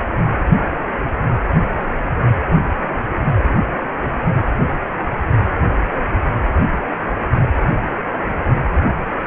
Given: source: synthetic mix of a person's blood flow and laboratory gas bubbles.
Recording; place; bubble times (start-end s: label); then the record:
Doppler ultrasound of blood flow; precordium
1.79-1.87 s: bubbles
From the record:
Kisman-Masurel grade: 111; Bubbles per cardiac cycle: 1 to 2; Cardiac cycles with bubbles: 1 to 10%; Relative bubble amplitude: barely perceptible (0.100 to 0.250); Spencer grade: 1 (occasional bubble signal discernible with the cardiac motion signal, with majority of cardiac periods free of bubbles); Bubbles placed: anywhere in the cardiac cycle